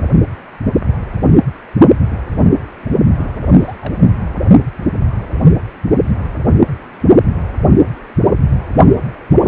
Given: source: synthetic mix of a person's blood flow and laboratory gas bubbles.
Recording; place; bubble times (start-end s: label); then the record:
Doppler ultrasound of blood flow; precordium
3.18-3.31 s: bubbles
3.43-3.54 s: bubbles
3.59-3.94 s: bubbles
From the record:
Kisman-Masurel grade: 211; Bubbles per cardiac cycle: several, 3 to 8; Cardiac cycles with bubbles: 1 to 10%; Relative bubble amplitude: barely perceptible (0.100 to 0.250); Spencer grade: 1 (occasional bubble signal discernible with the cardiac motion signal, with majority of cardiac periods free of bubbles); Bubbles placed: only in the low amplitude regions of the cardiac cycle